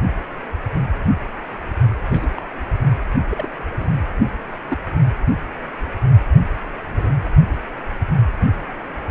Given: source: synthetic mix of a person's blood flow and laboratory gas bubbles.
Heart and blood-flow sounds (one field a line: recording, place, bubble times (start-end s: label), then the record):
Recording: Doppler ultrasound of blood flow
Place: precordium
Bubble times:
2.10-2.30 s: bubbles
2.37-2.41 s: bubbles
3.29-3.50 s: bubbles
3.80-3.92 s: bubbles
4.68-4.77 s: bubbles
6.92-7.13 s: bubbles
From the record:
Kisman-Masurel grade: 121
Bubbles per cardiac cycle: 1 to 2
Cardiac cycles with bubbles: 10 to 50%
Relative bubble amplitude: barely perceptible (0.100 to 0.250)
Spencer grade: 2 (many but less than half of the cardiac periods contain bubble signals, singularly or in groups)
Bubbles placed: anywhere in the cardiac cycle